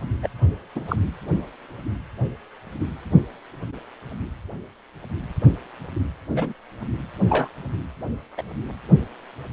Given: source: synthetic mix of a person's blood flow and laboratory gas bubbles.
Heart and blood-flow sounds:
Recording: Doppler ultrasound of blood flow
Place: precordium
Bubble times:
0.23-0.28 s: bubbles
0.75-0.84 s: bubbles
0.88-0.96 s: bubbles
6.34-6.53 s: bubbles
7.29-7.49 s: bubbles
8.37-8.43 s: bubbles
From the record:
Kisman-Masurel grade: 122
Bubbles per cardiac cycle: 1 to 2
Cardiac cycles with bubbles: 10 to 50%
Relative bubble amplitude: moderate (0.250 to 0.450)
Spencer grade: 2 (many but less than half of the cardiac periods contain bubble signals, singularly or in groups)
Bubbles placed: anywhere in the cardiac cycle

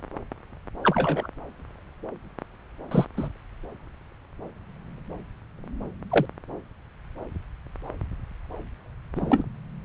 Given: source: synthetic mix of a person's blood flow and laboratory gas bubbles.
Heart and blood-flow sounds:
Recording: Doppler ultrasound of blood flow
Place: subclavian vein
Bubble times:
0.83-1.28 s: bubbles
2.91-3.06 s: bubbles
3.17-3.29 s: bubbles
6.11-6.26 s: bubbles
9.15-9.43 s: bubbles
From the record:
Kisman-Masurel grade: 122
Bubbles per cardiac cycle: 1 to 2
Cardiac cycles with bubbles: 10 to 50%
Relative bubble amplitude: moderate (0.250 to 0.450)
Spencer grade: 2 (many but less than half of the cardiac periods contain bubble signals, singularly or in groups)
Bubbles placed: anywhere in the cardiac cycle

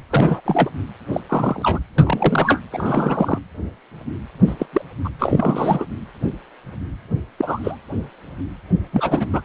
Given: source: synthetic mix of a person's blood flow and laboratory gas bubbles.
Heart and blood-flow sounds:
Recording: Doppler ultrasound of blood flow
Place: precordium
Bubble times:
0.10-0.40 s: bubbles
0.45-0.70 s: bubbles
1.12-1.21 s: bubbles
1.29-1.79 s: bubbles
1.98-2.60 s: bubbles
2.72-3.38 s: bubbles
4.47-4.54 s: bubbles
4.58-4.66 s: bubbles
4.72-4.81 s: bubbles
5.04-5.09 s: bubbles
5.18-5.85 s: bubbles
7.38-7.76 s: bubbles
8.93-9.26 s: bubbles
9.31-9.41 s: bubbles
From the record:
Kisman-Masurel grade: 232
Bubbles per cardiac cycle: several, 3 to 8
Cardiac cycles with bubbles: 50 to 99%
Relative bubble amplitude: moderate (0.250 to 0.450)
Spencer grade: 3 (all of the cardiac periods contain showers or single bubble signals, but not dominating or overriding the cardiac motion signals)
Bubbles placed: anywhere in the cardiac cycle

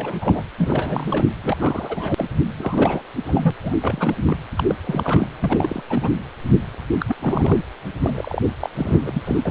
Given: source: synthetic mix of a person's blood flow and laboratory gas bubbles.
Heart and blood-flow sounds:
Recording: Doppler ultrasound of blood flow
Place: precordium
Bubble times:
0.00-0.43 s: bubbles
0.57-1.33 s: bubbles
1.44-2.26 s: bubbles
2.56-3.02 s: bubbles
3.26-3.51 s: bubbles
3.63-3.75 s: bubbles
3.81-4.14 s: bubbles
4.25-4.37 s: bubbles
4.55-4.63 s: bubbles
4.68-4.75 s: bubbles
4.84-5.27 s: bubbles
5.39-5.82 s: bubbles
5.89-6.11 s: bubbles
6.99-7.05 s: bubbles
7.08-7.16 s: bubbles
7.19-7.58 s: bubbles
8.03-8.44 s: bubbles
8.61-8.70 s: bubbles
8.75-9.22 s: bubbles
9.26-9.41 s: bubbles
9.45-9.51 s: bubbles
From the record:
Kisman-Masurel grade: 342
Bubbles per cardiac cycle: rolling drumbeat, 9 or more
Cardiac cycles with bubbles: 100%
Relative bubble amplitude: moderate (0.250 to 0.450)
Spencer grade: 3 (all of the cardiac periods contain showers or single bubble signals, but not dominating or overriding the cardiac motion signals)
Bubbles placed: anywhere in the cardiac cycle

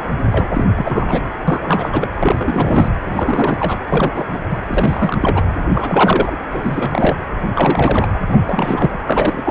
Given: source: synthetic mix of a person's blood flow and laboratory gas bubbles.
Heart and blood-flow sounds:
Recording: Doppler ultrasound of blood flow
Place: precordium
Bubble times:
0.31-0.47 s: bubbles
0.53-0.65 s: bubbles
0.76-1.28 s: bubbles
1.48-1.89 s: bubbles
1.92-2.08 s: bubbles
2.14-2.92 s: bubbles
3.05-3.79 s: bubbles
3.88-4.12 s: bubbles
4.15-4.39 s: bubbles
4.50-4.59 s: bubbles
4.69-5.44 s: bubbles
5.74-6.37 s: bubbles
6.53-7.20 s: bubbles
7.55-8.19 s: bubbles
8.27-8.41 s: bubbles
8.46-9.01 s: bubbles
9.06-9.51 s: bubbles
From the record:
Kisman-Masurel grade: 342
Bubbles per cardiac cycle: rolling drumbeat, 9 or more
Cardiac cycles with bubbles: 100%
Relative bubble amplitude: moderate (0.250 to 0.450)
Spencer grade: 3 (all of the cardiac periods contain showers or single bubble signals, but not dominating or overriding the cardiac motion signals)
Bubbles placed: anywhere in the cardiac cycle

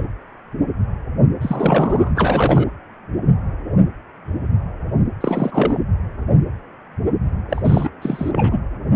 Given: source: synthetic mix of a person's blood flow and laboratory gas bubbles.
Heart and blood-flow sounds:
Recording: Doppler ultrasound of blood flow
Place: precordium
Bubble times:
0.00-0.05 s: bubbles
1.41-2.12 s: bubbles
2.15-2.67 s: bubbles
5.21-5.78 s: bubbles
7.48-7.89 s: bubbles
8.01-8.58 s: bubbles
From the record:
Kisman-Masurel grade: 332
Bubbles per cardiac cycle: rolling drumbeat, 9 or more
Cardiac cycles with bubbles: 50 to 99%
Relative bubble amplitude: moderate (0.250 to 0.450)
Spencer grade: 3 (all of the cardiac periods contain showers or single bubble signals, but not dominating or overriding the cardiac motion signals)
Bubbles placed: anywhere in the cardiac cycle

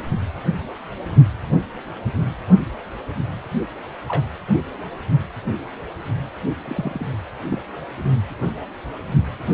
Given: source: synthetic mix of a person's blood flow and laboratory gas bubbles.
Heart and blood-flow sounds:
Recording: Doppler ultrasound of blood flow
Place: precordium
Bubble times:
4.08-4.23 s: bubbles
6.64-7.15 s: bubbles
7.50-7.59 s: bubbles
From the record:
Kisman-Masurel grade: 121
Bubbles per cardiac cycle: 1 to 2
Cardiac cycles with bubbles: 10 to 50%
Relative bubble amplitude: barely perceptible (0.100 to 0.250)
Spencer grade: 2 (many but less than half of the cardiac periods contain bubble signals, singularly or in groups)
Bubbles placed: only in the low amplitude regions of the cardiac cycle

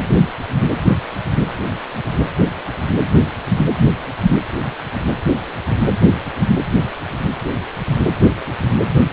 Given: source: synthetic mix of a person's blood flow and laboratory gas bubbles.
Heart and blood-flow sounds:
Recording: Doppler ultrasound of blood flow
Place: precordium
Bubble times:
no bubbles
From the record:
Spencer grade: 0 (complete lack of bubble signals)

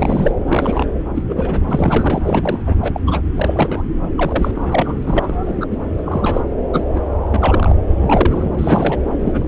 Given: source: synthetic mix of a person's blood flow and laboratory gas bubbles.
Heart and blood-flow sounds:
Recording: Doppler ultrasound of blood flow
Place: subclavian vein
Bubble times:
0.00-0.35 s: bubbles
0.46-0.90 s: bubbles
1.15-1.23 s: bubbles
1.28-1.60 s: bubbles
1.66-2.75 s: bubbles
2.81-3.00 s: bubbles
3.06-3.21 s: bubbles
3.37-3.82 s: bubbles
4.17-4.98 s: bubbles
5.03-5.34 s: bubbles
5.42-5.67 s: bubbles
5.71-5.79 s: bubbles
5.97-6.47 s: bubbles
6.72-6.84 s: bubbles
6.95-7.01 s: bubbles
7.27-7.76 s: bubbles
7.88-8.49 s: bubbles
8.52-8.99 s: bubbles
9.20-9.48 s: bubbles
From the record:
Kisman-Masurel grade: 243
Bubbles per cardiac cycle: several, 3 to 8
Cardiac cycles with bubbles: 100%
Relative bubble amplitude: loud (0.450 to 0.775)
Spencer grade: 3 (all of the cardiac periods contain showers or single bubble signals, but not dominating or overriding the cardiac motion signals)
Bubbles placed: anywhere in the cardiac cycle

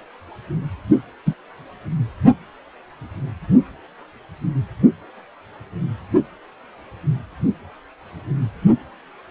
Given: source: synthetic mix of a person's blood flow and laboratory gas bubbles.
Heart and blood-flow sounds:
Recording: Doppler ultrasound of blood flow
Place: precordium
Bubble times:
1.26-1.34 s: bubbles
From the record:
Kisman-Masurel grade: 113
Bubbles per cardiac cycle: 1 to 2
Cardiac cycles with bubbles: 1 to 10%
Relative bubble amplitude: loud (0.450 to 0.775)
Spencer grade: 1 (occasional bubble signal discernible with the cardiac motion signal, with majority of cardiac periods free of bubbles)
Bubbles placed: anywhere in the cardiac cycle

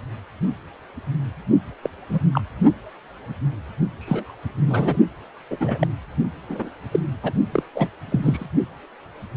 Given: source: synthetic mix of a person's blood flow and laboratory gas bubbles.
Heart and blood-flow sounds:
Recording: Doppler ultrasound of blood flow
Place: precordium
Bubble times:
1.82-1.90 s: bubbles
2.09-2.19 s: bubbles
2.33-2.41 s: bubbles
4.00-4.36 s: bubbles
4.67-4.97 s: bubbles
5.51-5.57 s: bubbles
5.60-5.87 s: bubbles
6.49-6.71 s: bubbles
6.91-7.00 s: bubbles
7.23-7.32 s: bubbles
7.52-7.63 s: bubbles
7.75-7.88 s: bubbles
8.10-8.20 s: bubbles
8.23-8.46 s: bubbles
From the record:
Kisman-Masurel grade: 232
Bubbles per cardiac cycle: several, 3 to 8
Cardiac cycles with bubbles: 50 to 99%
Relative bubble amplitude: moderate (0.250 to 0.450)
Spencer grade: 3 (all of the cardiac periods contain showers or single bubble signals, but not dominating or overriding the cardiac motion signals)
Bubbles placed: only in the low amplitude regions of the cardiac cycle

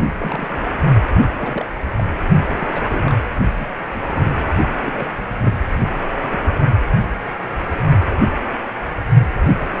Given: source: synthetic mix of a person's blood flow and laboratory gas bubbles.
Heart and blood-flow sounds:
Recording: Doppler ultrasound of blood flow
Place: precordium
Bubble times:
0.00-0.03 s: bubbles
0.20-0.64 s: bubbles
1.12-1.21 s: bubbles
1.23-1.28 s: bubbles
1.38-1.66 s: bubbles
1.96-2.04 s: bubbles
2.58-2.68 s: bubbles
2.73-3.15 s: bubbles
3.58-3.66 s: bubbles
3.94-3.99 s: bubbles
4.02-4.36 s: bubbles
4.85-5.08 s: bubbles
5.18-5.23 s: bubbles
5.42-5.58 s: bubbles
6.22-6.40 s: bubbles
6.44-6.49 s: bubbles
From the record:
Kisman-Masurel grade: 221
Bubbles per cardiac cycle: several, 3 to 8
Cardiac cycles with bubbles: 10 to 50%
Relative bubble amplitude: barely perceptible (0.100 to 0.250)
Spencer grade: 2 (many but less than half of the cardiac periods contain bubble signals, singularly or in groups)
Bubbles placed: only in the low amplitude regions of the cardiac cycle

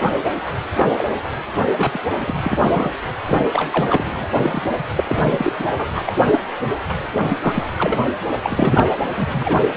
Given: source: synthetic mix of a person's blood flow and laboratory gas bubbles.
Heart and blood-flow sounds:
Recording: Doppler ultrasound of blood flow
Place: precordium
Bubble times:
0.00-0.11 s: bubbles
0.77-1.04 s: bubbles
1.57-1.62 s: bubbles
1.75-1.97 s: bubbles
2.19-2.35 s: bubbles
2.43-2.91 s: bubbles
3.26-3.39 s: bubbles
3.51-3.87 s: bubbles
3.90-4.04 s: bubbles
4.16-4.26 s: bubbles
4.42-4.72 s: bubbles
4.96-5.04 s: bubbles
5.07-5.52 s: bubbles
5.59-5.67 s: bubbles
5.77-5.89 s: bubbles
5.94-6.14 s: bubbles
6.19-6.26 s: bubbles
6.30-6.39 s: bubbles
7.14-7.26 s: bubbles
7.29-7.39 s: bubbles
7.42-7.75 s: bubbles
7.78-7.98 s: bubbles
8.42-8.88 s: bubbles
9.17-9.72 s: bubbles
From the record:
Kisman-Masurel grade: 243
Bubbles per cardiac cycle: several, 3 to 8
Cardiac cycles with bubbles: 100%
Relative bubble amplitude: loud (0.450 to 0.775)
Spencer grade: 3 (all of the cardiac periods contain showers or single bubble signals, but not dominating or overriding the cardiac motion signals)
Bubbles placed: anywhere in the cardiac cycle

